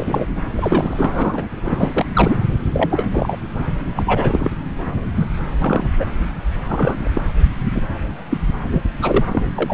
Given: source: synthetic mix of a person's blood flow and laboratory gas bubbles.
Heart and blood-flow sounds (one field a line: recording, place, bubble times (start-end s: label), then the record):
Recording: Doppler ultrasound of blood flow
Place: subclavian vein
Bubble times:
0.00-0.26 s: bubbles
0.57-1.46 s: bubbles
1.64-2.05 s: bubbles
2.15-2.37 s: bubbles
2.73-3.05 s: bubbles
3.11-3.37 s: bubbles
3.95-4.50 s: bubbles
5.17-5.26 s: bubbles
5.62-5.91 s: bubbles
5.96-6.05 s: bubbles
6.69-7.08 s: bubbles
7.13-7.21 s: bubbles
7.73-7.82 s: bubbles
8.30-8.38 s: bubbles
8.71-8.82 s: bubbles
9.02-9.25 s: bubbles
9.32-9.43 s: bubbles
9.56-9.74 s: bubbles
From the record:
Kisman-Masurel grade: 243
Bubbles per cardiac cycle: several, 3 to 8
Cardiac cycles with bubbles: 100%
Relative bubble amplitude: loud (0.450 to 0.775)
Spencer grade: 3 (all of the cardiac periods contain showers or single bubble signals, but not dominating or overriding the cardiac motion signals)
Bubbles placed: anywhere in the cardiac cycle